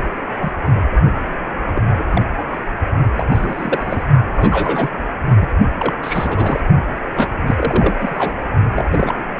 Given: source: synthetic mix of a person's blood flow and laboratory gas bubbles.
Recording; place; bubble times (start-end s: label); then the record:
Doppler ultrasound of blood flow; precordium
0.00-0.04 s: bubbles
0.41-0.52 s: bubbles
0.75-0.86 s: bubbles
1.75-1.81 s: bubbles
1.94-2.04 s: bubbles
2.13-2.23 s: bubbles
3.13-3.27 s: bubbles
3.31-4.09 s: bubbles
4.34-4.90 s: bubbles
5.29-5.55 s: bubbles
5.78-5.94 s: bubbles
6.02-6.60 s: bubbles
7.16-7.29 s: bubbles
7.46-7.95 s: bubbles
7.98-8.35 s: bubbles
8.74-8.86 s: bubbles
8.90-9.14 s: bubbles
From the record:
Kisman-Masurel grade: 232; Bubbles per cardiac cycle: several, 3 to 8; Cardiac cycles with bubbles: 50 to 99%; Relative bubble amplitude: moderate (0.250 to 0.450); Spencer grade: 3 (all of the cardiac periods contain showers or single bubble signals, but not dominating or overriding the cardiac motion signals); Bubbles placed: only in the low amplitude regions of the cardiac cycle